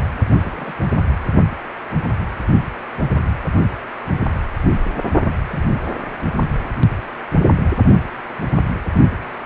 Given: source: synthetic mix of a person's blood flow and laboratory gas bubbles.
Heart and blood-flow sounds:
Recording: Doppler ultrasound of blood flow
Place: precordium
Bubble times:
0.40-0.73 s: bubbles
5.48-5.59 s: bubbles
From the record:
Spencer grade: 2 (many but less than half of the cardiac periods contain bubble signals, singularly or in groups)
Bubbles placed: only in the low amplitude regions of the cardiac cycle

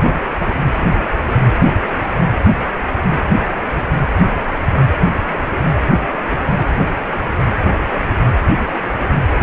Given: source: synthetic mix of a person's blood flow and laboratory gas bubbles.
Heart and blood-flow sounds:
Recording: Doppler ultrasound of blood flow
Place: precordium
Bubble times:
no bubbles
From the record:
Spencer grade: 0 (complete lack of bubble signals)

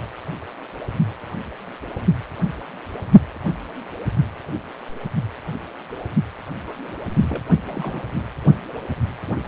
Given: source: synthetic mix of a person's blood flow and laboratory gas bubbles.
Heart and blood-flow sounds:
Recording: Doppler ultrasound of blood flow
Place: precordium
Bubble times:
6.66-7.00 s: bubbles
7.16-7.42 s: bubbles
7.67-8.02 s: bubbles
From the record:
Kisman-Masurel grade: 211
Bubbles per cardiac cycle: several, 3 to 8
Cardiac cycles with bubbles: 1 to 10%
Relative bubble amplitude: barely perceptible (0.100 to 0.250)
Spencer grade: 1 (occasional bubble signal discernible with the cardiac motion signal, with majority of cardiac periods free of bubbles)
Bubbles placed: anywhere in the cardiac cycle

